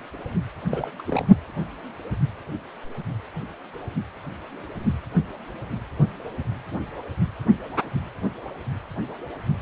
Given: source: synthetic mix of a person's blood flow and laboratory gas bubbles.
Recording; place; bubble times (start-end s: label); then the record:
Doppler ultrasound of blood flow; precordium
0.69-0.91 s: bubbles
0.98-1.02 s: bubbles
1.07-1.26 s: bubbles
From the record:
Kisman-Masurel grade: 211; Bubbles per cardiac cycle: several, 3 to 8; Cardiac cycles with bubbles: 1 to 10%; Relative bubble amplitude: barely perceptible (0.100 to 0.250); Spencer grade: 1 (occasional bubble signal discernible with the cardiac motion signal, with majority of cardiac periods free of bubbles); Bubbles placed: only in the low amplitude regions of the cardiac cycle